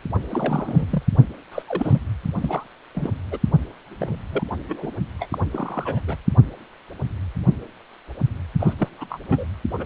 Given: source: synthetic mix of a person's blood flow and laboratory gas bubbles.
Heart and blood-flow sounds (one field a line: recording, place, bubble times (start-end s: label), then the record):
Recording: Doppler ultrasound of blood flow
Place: precordium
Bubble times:
0.30-0.87 s: bubbles
0.90-1.02 s: bubbles
1.51-1.62 s: bubbles
1.68-1.99 s: bubbles
2.41-2.64 s: bubbles
2.95-3.10 s: bubbles
3.31-3.39 s: bubbles
3.98-4.15 s: bubbles
4.32-4.43 s: bubbles
4.68-4.92 s: bubbles
5.19-5.29 s: bubbles
5.32-5.38 s: bubbles
5.51-6.02 s: bubbles
6.08-6.17 s: bubbles
8.60-8.74 s: bubbles
8.79-8.88 s: bubbles
8.98-9.06 s: bubbles
9.10-9.20 s: bubbles
9.28-9.45 s: bubbles
9.78-9.86 s: bubbles
From the record:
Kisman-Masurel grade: 232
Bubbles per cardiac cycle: several, 3 to 8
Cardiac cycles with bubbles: 50 to 99%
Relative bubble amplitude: moderate (0.250 to 0.450)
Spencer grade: 3 (all of the cardiac periods contain showers or single bubble signals, but not dominating or overriding the cardiac motion signals)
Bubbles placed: only in the low amplitude regions of the cardiac cycle